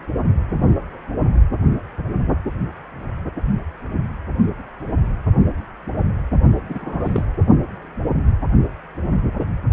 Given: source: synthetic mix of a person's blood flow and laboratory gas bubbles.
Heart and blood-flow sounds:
Doppler ultrasound of blood flow; precordium
6.69-7.24 s: bubbles
From the record:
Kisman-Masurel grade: 212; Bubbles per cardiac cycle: several, 3 to 8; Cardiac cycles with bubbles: 1 to 10%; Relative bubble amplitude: moderate (0.250 to 0.450); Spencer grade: 1 (occasional bubble signal discernible with the cardiac motion signal, with majority of cardiac periods free of bubbles); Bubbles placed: only in the low amplitude regions of the cardiac cycle

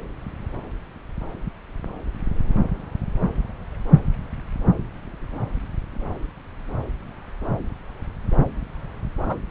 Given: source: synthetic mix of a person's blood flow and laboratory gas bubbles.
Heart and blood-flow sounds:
Doppler ultrasound of blood flow; subclavian vein
9.23-9.37 s: bubbles
From the record:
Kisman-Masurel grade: 112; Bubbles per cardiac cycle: 1 to 2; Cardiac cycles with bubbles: 1 to 10%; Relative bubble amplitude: moderate (0.250 to 0.450); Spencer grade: 1 (occasional bubble signal discernible with the cardiac motion signal, with majority of cardiac periods free of bubbles); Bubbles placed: anywhere in the cardiac cycle

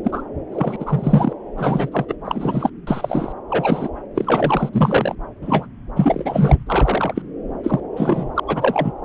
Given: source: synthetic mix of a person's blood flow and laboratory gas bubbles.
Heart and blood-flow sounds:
Doppler ultrasound of blood flow; subclavian vein
0.04-0.23 s: bubbles
0.52-0.76 s: bubbles
0.80-1.33 s: bubbles
1.58-2.05 s: bubbles
2.08-2.15 s: bubbles
2.24-2.70 s: bubbles
2.87-3.32 s: bubbles
3.49-3.88 s: bubbles
4.14-4.70 s: bubbles
4.73-5.15 s: bubbles
5.42-5.68 s: bubbles
5.96-6.63 s: bubbles
6.67-7.22 s: bubbles
7.63-7.80 s: bubbles
7.96-8.32 s: bubbles
8.36-8.40 s: bubbles
8.47-8.92 s: bubbles
From the record:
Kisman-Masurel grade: 243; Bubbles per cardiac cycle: several, 3 to 8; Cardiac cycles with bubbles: 100%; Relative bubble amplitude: loud (0.450 to 0.775); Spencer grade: 3 (all of the cardiac periods contain showers or single bubble signals, but not dominating or overriding the cardiac motion signals); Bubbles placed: anywhere in the cardiac cycle

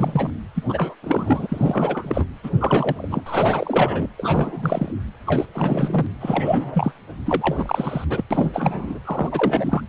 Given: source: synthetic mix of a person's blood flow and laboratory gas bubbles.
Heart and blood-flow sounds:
Doppler ultrasound of blood flow; precordium
0.00-0.30 s: bubbles
0.55-0.63 s: bubbles
0.68-0.95 s: bubbles
1.02-2.25 s: bubbles
2.43-2.50 s: bubbles
2.60-3.23 s: bubbles
3.26-4.08 s: bubbles
4.18-4.92 s: bubbles
5.26-5.46 s: bubbles
5.54-6.07 s: bubbles
6.21-6.92 s: bubbles
7.26-8.04 s: bubbles
8.10-8.25 s: bubbles
8.30-8.99 s: bubbles
9.05-9.83 s: bubbles
From the record:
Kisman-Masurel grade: 333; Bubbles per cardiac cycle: rolling drumbeat, 9 or more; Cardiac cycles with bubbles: 50 to 99%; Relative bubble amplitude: loud (0.450 to 0.775); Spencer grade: 3 (all of the cardiac periods contain showers or single bubble signals, but not dominating or overriding the cardiac motion signals); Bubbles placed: anywhere in the cardiac cycle

